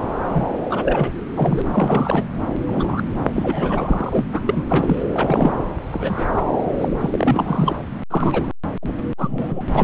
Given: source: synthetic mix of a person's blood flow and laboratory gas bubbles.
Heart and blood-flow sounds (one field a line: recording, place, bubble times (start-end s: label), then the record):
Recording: Doppler ultrasound of blood flow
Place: subclavian vein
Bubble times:
0.33-0.47 s: bubbles
0.70-1.12 s: bubbles
1.34-2.24 s: bubbles
2.66-3.02 s: bubbles
3.33-4.24 s: bubbles
4.33-4.41 s: bubbles
4.46-4.65 s: bubbles
4.69-5.03 s: bubbles
5.13-5.53 s: bubbles
5.92-6.26 s: bubbles
6.36-6.45 s: bubbles
6.79-6.88 s: bubbles
7.00-7.78 s: bubbles
8.10-8.46 s: bubbles
8.82-8.95 s: bubbles
9.18-9.62 s: bubbles
9.75-9.84 s: bubbles
From the record:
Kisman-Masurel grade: 242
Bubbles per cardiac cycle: several, 3 to 8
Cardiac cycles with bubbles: 100%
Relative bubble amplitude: moderate (0.250 to 0.450)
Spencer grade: 3 (all of the cardiac periods contain showers or single bubble signals, but not dominating or overriding the cardiac motion signals)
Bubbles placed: anywhere in the cardiac cycle